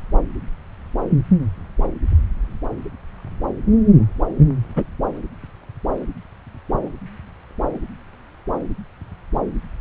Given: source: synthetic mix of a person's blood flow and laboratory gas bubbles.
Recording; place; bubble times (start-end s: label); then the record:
Doppler ultrasound of blood flow; subclavian vein
4.75-4.84 s: bubbles
From the record:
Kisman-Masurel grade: 113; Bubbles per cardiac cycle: 1 to 2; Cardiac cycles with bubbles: 1 to 10%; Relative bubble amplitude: loud (0.450 to 0.775); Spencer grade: 1 (occasional bubble signal discernible with the cardiac motion signal, with majority of cardiac periods free of bubbles); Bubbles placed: anywhere in the cardiac cycle